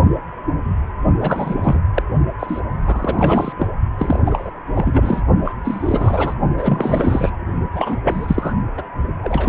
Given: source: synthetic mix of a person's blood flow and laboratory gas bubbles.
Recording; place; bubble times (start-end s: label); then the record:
Doppler ultrasound of blood flow; precordium
1.21-1.80 s: bubbles
1.94-2.03 s: bubbles
2.39-2.60 s: bubbles
2.83-3.53 s: bubbles
3.59-3.67 s: bubbles
3.98-4.19 s: bubbles
4.25-4.50 s: bubbles
4.75-5.21 s: bubbles
5.44-5.52 s: bubbles
5.64-6.34 s: bubbles
6.57-7.31 s: bubbles
7.74-7.98 s: bubbles
8.04-8.54 s: bubbles
8.77-8.82 s: bubbles
9.22-9.49 s: bubbles
From the record:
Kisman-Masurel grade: 332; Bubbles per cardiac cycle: rolling drumbeat, 9 or more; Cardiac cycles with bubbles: 50 to 99%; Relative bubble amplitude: moderate (0.250 to 0.450); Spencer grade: 3 (all of the cardiac periods contain showers or single bubble signals, but not dominating or overriding the cardiac motion signals); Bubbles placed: only in the low amplitude regions of the cardiac cycle